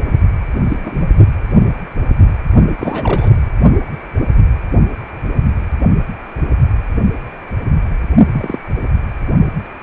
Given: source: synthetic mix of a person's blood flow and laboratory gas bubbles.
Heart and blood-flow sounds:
Doppler ultrasound of blood flow; precordium
0.68-0.77 s: bubbles
0.84-1.07 s: bubbles
2.77-3.30 s: bubbles
8.32-8.59 s: bubbles
From the record:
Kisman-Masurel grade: 222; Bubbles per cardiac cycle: several, 3 to 8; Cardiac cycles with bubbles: 10 to 50%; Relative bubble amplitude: moderate (0.250 to 0.450); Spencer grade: 2 (many but less than half of the cardiac periods contain bubble signals, singularly or in groups); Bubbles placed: only in the low amplitude regions of the cardiac cycle

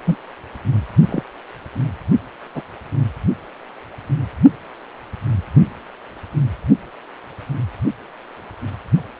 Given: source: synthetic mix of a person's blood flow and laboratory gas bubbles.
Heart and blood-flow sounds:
Doppler ultrasound of blood flow; precordium
0.05-0.17 s: bubbles
1.09-1.23 s: bubbles
2.54-2.62 s: bubbles
From the record:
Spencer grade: 2 (many but less than half of the cardiac periods contain bubble signals, singularly or in groups); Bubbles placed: only in the low amplitude regions of the cardiac cycle

